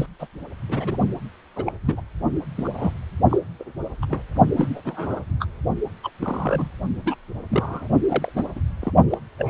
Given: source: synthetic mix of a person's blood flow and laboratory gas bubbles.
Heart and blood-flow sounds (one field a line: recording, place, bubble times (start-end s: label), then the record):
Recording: Doppler ultrasound of blood flow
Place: precordium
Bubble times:
0.00-0.06 s: bubbles
0.19-0.27 s: bubbles
0.68-0.97 s: bubbles
1.56-1.63 s: bubbles
1.66-1.72 s: bubbles
1.85-2.01 s: bubbles
2.56-2.94 s: bubbles
3.29-3.39 s: bubbles
3.59-3.64 s: bubbles
4.01-4.05 s: bubbles
4.08-4.23 s: bubbles
4.57-4.80 s: bubbles
4.84-5.20 s: bubbles
5.40-5.46 s: bubbles
6.03-6.09 s: bubbles
6.19-6.69 s: bubbles
7.05-7.16 s: bubbles
7.48-7.88 s: bubbles
8.09-8.32 s: bubbles
8.34-8.45 s: bubbles
8.55-8.59 s: bubbles
8.81-8.92 s: bubbles
9.10-9.18 s: bubbles
9.38-9.50 s: bubbles
From the record:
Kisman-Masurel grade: 242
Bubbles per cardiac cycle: several, 3 to 8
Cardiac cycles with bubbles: 100%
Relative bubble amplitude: moderate (0.250 to 0.450)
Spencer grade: 3 (all of the cardiac periods contain showers or single bubble signals, but not dominating or overriding the cardiac motion signals)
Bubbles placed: only in the low amplitude regions of the cardiac cycle